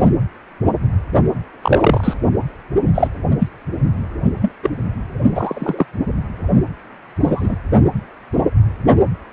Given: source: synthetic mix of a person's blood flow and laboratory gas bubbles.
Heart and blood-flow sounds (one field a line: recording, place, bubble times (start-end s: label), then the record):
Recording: Doppler ultrasound of blood flow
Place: precordium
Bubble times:
1.62-2.13 s: bubbles
2.94-3.08 s: bubbles
3.39-3.47 s: bubbles
4.41-4.51 s: bubbles
4.62-4.70 s: bubbles
5.35-5.86 s: bubbles
7.23-7.56 s: bubbles
From the record:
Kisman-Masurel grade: 123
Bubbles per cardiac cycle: 1 to 2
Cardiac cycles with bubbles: 10 to 50%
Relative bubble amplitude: loud (0.450 to 0.775)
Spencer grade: 2 (many but less than half of the cardiac periods contain bubble signals, singularly or in groups)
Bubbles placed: only in the low amplitude regions of the cardiac cycle